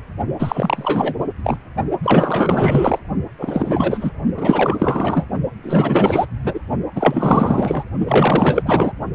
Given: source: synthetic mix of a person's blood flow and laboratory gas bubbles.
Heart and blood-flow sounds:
Doppler ultrasound of blood flow; precordium
0.39-1.14 s: bubbles
1.44-1.57 s: bubbles
2.03-3.00 s: bubbles
3.38-4.12 s: bubbles
4.37-5.26 s: bubbles
5.62-6.25 s: bubbles
6.44-6.60 s: bubbles
6.96-7.84 s: bubbles
8.06-8.62 s: bubbles
8.65-8.92 s: bubbles
From the record:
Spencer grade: 4 (maximum detectable bubble signal sounding continuously throughout systole and diastole of every cardiac period, and overriding the amplitude of the normal cardiac signals); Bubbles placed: only in the low amplitude regions of the cardiac cycle

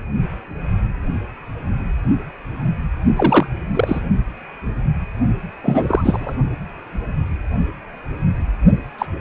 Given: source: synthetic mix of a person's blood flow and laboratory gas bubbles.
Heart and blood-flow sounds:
Doppler ultrasound of blood flow; precordium
3.15-3.46 s: bubbles
3.73-4.01 s: bubbles
5.63-6.36 s: bubbles
8.98-9.06 s: bubbles
From the record:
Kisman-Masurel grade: 223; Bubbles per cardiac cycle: several, 3 to 8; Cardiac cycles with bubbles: 10 to 50%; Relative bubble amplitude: loud (0.450 to 0.775); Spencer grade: 2 (many but less than half of the cardiac periods contain bubble signals, singularly or in groups); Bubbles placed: only in the low amplitude regions of the cardiac cycle

